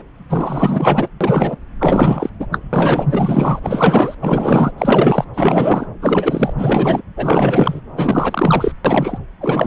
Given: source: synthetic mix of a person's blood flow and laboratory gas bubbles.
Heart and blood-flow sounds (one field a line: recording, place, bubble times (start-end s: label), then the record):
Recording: Doppler ultrasound of blood flow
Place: subclavian vein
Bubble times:
0.00-0.02 s: bubbles
0.29-1.08 s: bubbles
1.21-1.56 s: bubbles
1.79-2.29 s: bubbles
2.40-2.47 s: bubbles
2.51-2.58 s: bubbles
2.73-3.60 s: bubbles
3.62-4.15 s: bubbles
4.21-4.72 s: bubbles
4.77-5.25 s: bubbles
5.34-5.87 s: bubbles
6.01-6.53 s: bubbles
6.58-7.01 s: bubbles
7.17-7.81 s: bubbles
7.96-8.72 s: bubbles
8.85-9.18 s: bubbles
9.41-9.67 s: bubbles
From the record:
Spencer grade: 4 (maximum detectable bubble signal sounding continuously throughout systole and diastole of every cardiac period, and overriding the amplitude of the normal cardiac signals)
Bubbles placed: anywhere in the cardiac cycle